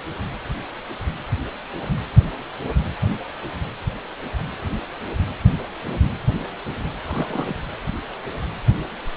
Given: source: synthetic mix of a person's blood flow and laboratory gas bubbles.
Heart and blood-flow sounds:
Doppler ultrasound of blood flow; precordium
7.04-7.56 s: bubbles
From the record:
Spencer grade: 1 (occasional bubble signal discernible with the cardiac motion signal, with majority of cardiac periods free of bubbles); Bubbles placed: anywhere in the cardiac cycle

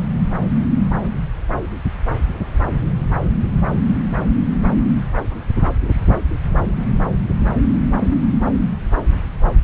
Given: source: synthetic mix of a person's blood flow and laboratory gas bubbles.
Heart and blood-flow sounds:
Doppler ultrasound of blood flow; subclavian vein
no bubbles
From the record:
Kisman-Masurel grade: 000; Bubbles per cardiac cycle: 0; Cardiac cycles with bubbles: 0%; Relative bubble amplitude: no bubbles discernible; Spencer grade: 0 (complete lack of bubble signals)

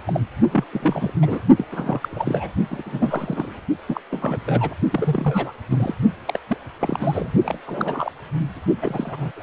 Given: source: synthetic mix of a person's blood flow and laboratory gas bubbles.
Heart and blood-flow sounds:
Doppler ultrasound of blood flow; precordium
0.07-0.20 s: bubbles
0.51-0.64 s: bubbles
0.72-1.12 s: bubbles
1.21-1.40 s: bubbles
1.56-1.65 s: bubbles
1.72-2.50 s: bubbles
2.71-2.82 s: bubbles
2.85-3.60 s: bubbles
3.87-4.01 s: bubbles
4.11-4.39 s: bubbles
4.46-4.74 s: bubbles
4.91-5.52 s: bubbles
5.70-5.95 s: bubbles
6.25-6.39 s: bubbles
6.48-6.58 s: bubbles
6.79-7.32 s: bubbles
7.44-7.58 s: bubbles
7.66-8.12 s: bubbles
8.81-9.31 s: bubbles
9.37-9.43 s: bubbles
From the record:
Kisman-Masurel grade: 342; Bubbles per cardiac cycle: rolling drumbeat, 9 or more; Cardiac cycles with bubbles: 100%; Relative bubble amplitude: moderate (0.250 to 0.450); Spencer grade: 3 (all of the cardiac periods contain showers or single bubble signals, but not dominating or overriding the cardiac motion signals); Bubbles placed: only in the low amplitude regions of the cardiac cycle

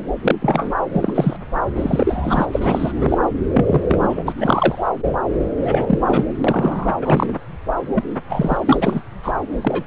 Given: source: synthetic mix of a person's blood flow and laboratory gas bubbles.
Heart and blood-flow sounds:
Doppler ultrasound of blood flow; subclavian vein
0.21-0.35 s: bubbles
0.42-0.73 s: bubbles
0.92-1.36 s: bubbles
1.75-2.46 s: bubbles
2.52-3.18 s: bubbles
3.53-3.83 s: bubbles
3.88-4.33 s: bubbles
4.38-4.88 s: bubbles
5.60-5.99 s: bubbles
6.07-6.25 s: bubbles
6.44-6.88 s: bubbles
7.01-7.33 s: bubbles
7.95-8.04 s: bubbles
8.29-8.57 s: bubbles
8.66-9.01 s: bubbles
9.23-9.32 s: bubbles
9.61-9.83 s: bubbles
From the record:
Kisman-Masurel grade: 243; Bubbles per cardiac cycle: several, 3 to 8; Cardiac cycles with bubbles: 100%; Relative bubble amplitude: loud (0.450 to 0.775); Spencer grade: 3 (all of the cardiac periods contain showers or single bubble signals, but not dominating or overriding the cardiac motion signals); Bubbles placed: anywhere in the cardiac cycle

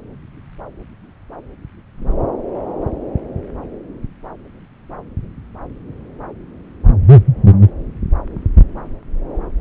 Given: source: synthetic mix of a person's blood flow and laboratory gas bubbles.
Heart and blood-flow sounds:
Doppler ultrasound of blood flow; subclavian vein
no bubbles
From the record:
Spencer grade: 0 (complete lack of bubble signals)

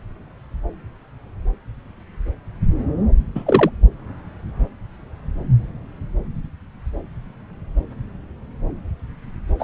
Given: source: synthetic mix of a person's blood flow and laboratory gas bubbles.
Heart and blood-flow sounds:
Doppler ultrasound of blood flow; subclavian vein
3.34-3.70 s: bubbles
9.59-9.64 s: bubbles
From the record:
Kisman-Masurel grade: 223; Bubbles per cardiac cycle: several, 3 to 8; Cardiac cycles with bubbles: 10 to 50%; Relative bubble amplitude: loud (0.450 to 0.775); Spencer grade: 2 (many but less than half of the cardiac periods contain bubble signals, singularly or in groups); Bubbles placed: anywhere in the cardiac cycle

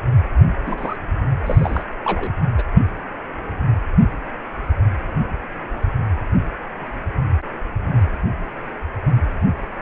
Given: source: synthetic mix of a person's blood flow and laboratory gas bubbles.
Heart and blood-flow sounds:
Doppler ultrasound of blood flow; precordium
0.66-0.96 s: bubbles
1.45-1.84 s: bubbles
2.04-2.32 s: bubbles
2.58-2.63 s: bubbles
From the record:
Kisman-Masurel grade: 212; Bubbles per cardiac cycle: several, 3 to 8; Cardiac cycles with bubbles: 1 to 10%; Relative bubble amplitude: moderate (0.250 to 0.450); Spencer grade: 1 (occasional bubble signal discernible with the cardiac motion signal, with majority of cardiac periods free of bubbles); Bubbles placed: only in the low amplitude regions of the cardiac cycle

